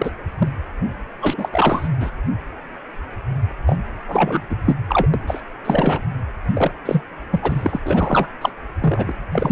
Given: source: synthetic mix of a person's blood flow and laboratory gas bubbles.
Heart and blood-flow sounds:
Doppler ultrasound of blood flow; precordium
0.00-0.11 s: bubbles
0.38-0.48 s: bubbles
1.21-1.48 s: bubbles
1.52-1.88 s: bubbles
2.00-2.10 s: bubbles
3.66-3.79 s: bubbles
4.08-4.42 s: bubbles
4.50-4.56 s: bubbles
4.65-4.75 s: bubbles
4.88-5.07 s: bubbles
5.13-5.21 s: bubbles
5.27-5.43 s: bubbles
5.64-6.02 s: bubbles
6.54-6.71 s: bubbles
6.85-7.02 s: bubbles
7.30-7.79 s: bubbles
7.83-8.28 s: bubbles
8.41-8.50 s: bubbles
8.80-9.12 s: bubbles
9.32-9.52 s: bubbles
From the record:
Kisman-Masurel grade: 333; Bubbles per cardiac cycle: rolling drumbeat, 9 or more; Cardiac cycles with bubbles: 50 to 99%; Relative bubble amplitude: loud (0.450 to 0.775); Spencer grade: 3 (all of the cardiac periods contain showers or single bubble signals, but not dominating or overriding the cardiac motion signals); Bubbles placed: anywhere in the cardiac cycle

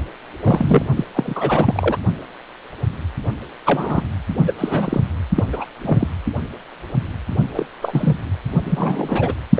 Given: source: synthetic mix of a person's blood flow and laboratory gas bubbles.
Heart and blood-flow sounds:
Doppler ultrasound of blood flow; precordium
0.42-0.83 s: bubbles
0.96-1.05 s: bubbles
1.14-1.97 s: bubbles
3.65-4.03 s: bubbles
4.42-4.52 s: bubbles
4.58-5.01 s: bubbles
5.35-5.44 s: bubbles
5.52-5.65 s: bubbles
5.84-6.08 s: bubbles
7.54-7.66 s: bubbles
7.82-8.16 s: bubbles
8.63-9.36 s: bubbles
9.54-9.59 s: bubbles
From the record:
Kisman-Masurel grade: 232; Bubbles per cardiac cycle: several, 3 to 8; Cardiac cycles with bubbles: 50 to 99%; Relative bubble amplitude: moderate (0.250 to 0.450); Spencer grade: 3 (all of the cardiac periods contain showers or single bubble signals, but not dominating or overriding the cardiac motion signals); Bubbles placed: only in the low amplitude regions of the cardiac cycle

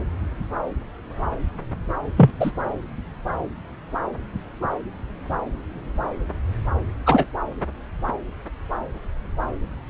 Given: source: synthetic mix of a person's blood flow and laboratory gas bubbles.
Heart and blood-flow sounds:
Doppler ultrasound of blood flow; subclavian vein
2.17-2.31 s: bubbles
2.40-2.51 s: bubbles
7.06-7.25 s: bubbles
From the record:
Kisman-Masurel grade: 113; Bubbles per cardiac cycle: 1 to 2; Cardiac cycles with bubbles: 1 to 10%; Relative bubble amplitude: loud (0.450 to 0.775); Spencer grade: 1 (occasional bubble signal discernible with the cardiac motion signal, with majority of cardiac periods free of bubbles); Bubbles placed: anywhere in the cardiac cycle

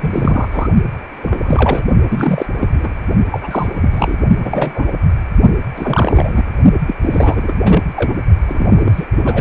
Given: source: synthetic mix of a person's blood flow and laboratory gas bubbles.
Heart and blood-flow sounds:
Doppler ultrasound of blood flow; precordium
0.00-0.48 s: bubbles
0.51-0.68 s: bubbles
1.21-1.84 s: bubbles
2.08-2.46 s: bubbles
2.59-2.67 s: bubbles
2.73-2.94 s: bubbles
3.31-4.17 s: bubbles
4.42-4.93 s: bubbles
5.76-6.44 s: bubbles
6.87-6.95 s: bubbles
7.02-7.53 s: bubbles
7.59-7.82 s: bubbles
7.96-8.14 s: bubbles
8.47-9.05 s: bubbles
9.24-9.41 s: bubbles
From the record:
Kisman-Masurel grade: 343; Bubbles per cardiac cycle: rolling drumbeat, 9 or more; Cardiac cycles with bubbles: 100%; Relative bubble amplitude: loud (0.450 to 0.775); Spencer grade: 3 (all of the cardiac periods contain showers or single bubble signals, but not dominating or overriding the cardiac motion signals); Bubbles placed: only in the low amplitude regions of the cardiac cycle

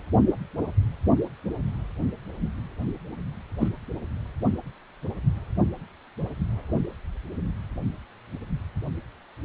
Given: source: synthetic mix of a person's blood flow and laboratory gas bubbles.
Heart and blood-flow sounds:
Doppler ultrasound of blood flow; precordium
3.60-3.68 s: bubbles
From the record:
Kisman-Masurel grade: 112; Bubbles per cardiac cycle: 1 to 2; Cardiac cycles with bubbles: 1 to 10%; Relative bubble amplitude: moderate (0.250 to 0.450); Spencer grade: 1 (occasional bubble signal discernible with the cardiac motion signal, with majority of cardiac periods free of bubbles); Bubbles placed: only in the low amplitude regions of the cardiac cycle

